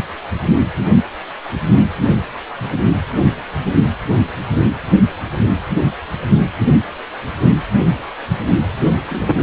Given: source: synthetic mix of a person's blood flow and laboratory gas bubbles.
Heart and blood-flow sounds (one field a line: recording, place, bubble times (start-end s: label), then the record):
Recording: Doppler ultrasound of blood flow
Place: precordium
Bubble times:
9.08-9.42 s: bubbles
From the record:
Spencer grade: 1 (occasional bubble signal discernible with the cardiac motion signal, with majority of cardiac periods free of bubbles)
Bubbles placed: anywhere in the cardiac cycle